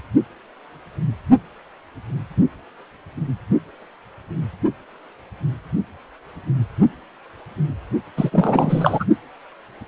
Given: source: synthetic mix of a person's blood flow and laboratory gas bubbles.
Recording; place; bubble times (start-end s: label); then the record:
Doppler ultrasound of blood flow; precordium
8.17-9.05 s: bubbles
From the record:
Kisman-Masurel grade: 213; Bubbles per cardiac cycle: several, 3 to 8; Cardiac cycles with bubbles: 1 to 10%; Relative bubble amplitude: loud (0.450 to 0.775); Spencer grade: 1 (occasional bubble signal discernible with the cardiac motion signal, with majority of cardiac periods free of bubbles); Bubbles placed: only in the low amplitude regions of the cardiac cycle